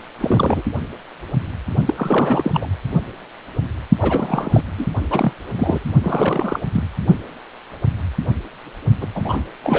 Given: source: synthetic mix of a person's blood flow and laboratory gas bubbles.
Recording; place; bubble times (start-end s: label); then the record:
Doppler ultrasound of blood flow; precordium
0.20-0.62 s: bubbles
1.85-1.94 s: bubbles
1.97-2.67 s: bubbles
4.00-4.62 s: bubbles
4.77-4.87 s: bubbles
5.10-5.32 s: bubbles
5.46-5.91 s: bubbles
6.03-6.60 s: bubbles
6.73-6.83 s: bubbles
9.00-9.07 s: bubbles
9.14-9.43 s: bubbles
9.63-9.79 s: bubbles
From the record:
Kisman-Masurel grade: 332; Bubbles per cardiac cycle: rolling drumbeat, 9 or more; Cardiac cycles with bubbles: 50 to 99%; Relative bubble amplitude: moderate (0.250 to 0.450); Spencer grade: 3 (all of the cardiac periods contain showers or single bubble signals, but not dominating or overriding the cardiac motion signals); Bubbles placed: only in the low amplitude regions of the cardiac cycle